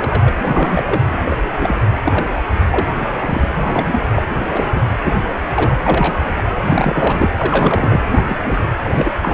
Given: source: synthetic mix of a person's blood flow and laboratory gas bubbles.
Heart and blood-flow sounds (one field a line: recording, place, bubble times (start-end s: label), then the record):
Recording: Doppler ultrasound of blood flow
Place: precordium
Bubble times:
0.00-0.35 s: bubbles
0.42-0.83 s: bubbles
0.85-1.01 s: bubbles
1.13-1.19 s: bubbles
1.28-1.36 s: bubbles
1.59-1.76 s: bubbles
2.04-2.42 s: bubbles
2.70-2.87 s: bubbles
3.23-3.50 s: bubbles
3.56-3.99 s: bubbles
4.15-4.22 s: bubbles
4.49-4.89 s: bubbles
5.02-5.12 s: bubbles
5.49-5.71 s: bubbles
5.83-6.19 s: bubbles
6.35-6.43 s: bubbles
6.56-6.62 s: bubbles
6.68-7.29 s: bubbles
7.36-8.00 s: bubbles
8.12-8.24 s: bubbles
8.29-8.37 s: bubbles
8.45-8.61 s: bubbles
8.84-8.90 s: bubbles
8.95-9.12 s: bubbles
9.22-9.34 s: bubbles
From the record:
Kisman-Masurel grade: 242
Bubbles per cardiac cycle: several, 3 to 8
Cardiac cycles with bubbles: 100%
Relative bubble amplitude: moderate (0.250 to 0.450)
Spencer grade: 3 (all of the cardiac periods contain showers or single bubble signals, but not dominating or overriding the cardiac motion signals)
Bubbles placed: anywhere in the cardiac cycle